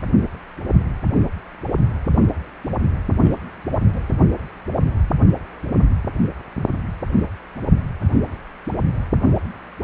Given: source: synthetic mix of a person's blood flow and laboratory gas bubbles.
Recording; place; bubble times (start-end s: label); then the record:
Doppler ultrasound of blood flow; precordium
3.16-3.30 s: bubbles
3.90-4.10 s: bubbles
7.07-7.26 s: bubbles
8.70-8.78 s: bubbles
From the record:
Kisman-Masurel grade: 121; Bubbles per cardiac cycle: 1 to 2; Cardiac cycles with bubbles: 10 to 50%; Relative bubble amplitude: barely perceptible (0.100 to 0.250); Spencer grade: 2 (many but less than half of the cardiac periods contain bubble signals, singularly or in groups); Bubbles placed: anywhere in the cardiac cycle